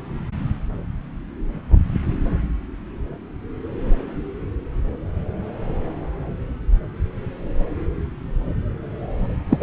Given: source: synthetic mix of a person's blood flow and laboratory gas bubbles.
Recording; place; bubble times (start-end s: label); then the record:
Doppler ultrasound of blood flow; subclavian vein
9.49-9.63 s: bubbles
From the record:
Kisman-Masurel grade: 222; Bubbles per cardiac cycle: several, 3 to 8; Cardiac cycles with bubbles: 10 to 50%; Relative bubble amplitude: moderate (0.250 to 0.450); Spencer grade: 2 (many but less than half of the cardiac periods contain bubble signals, singularly or in groups); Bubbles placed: anywhere in the cardiac cycle